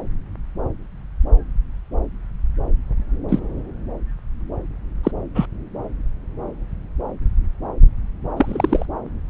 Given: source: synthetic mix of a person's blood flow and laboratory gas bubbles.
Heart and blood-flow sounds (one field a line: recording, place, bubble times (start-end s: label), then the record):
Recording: Doppler ultrasound of blood flow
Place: subclavian vein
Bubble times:
3.29-3.40 s: bubbles
5.03-5.12 s: bubbles
5.35-5.46 s: bubbles
8.37-8.86 s: bubbles
From the record:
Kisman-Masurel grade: 123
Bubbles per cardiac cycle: 1 to 2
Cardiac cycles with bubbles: 10 to 50%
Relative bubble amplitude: loud (0.450 to 0.775)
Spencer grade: 2 (many but less than half of the cardiac periods contain bubble signals, singularly or in groups)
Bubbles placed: anywhere in the cardiac cycle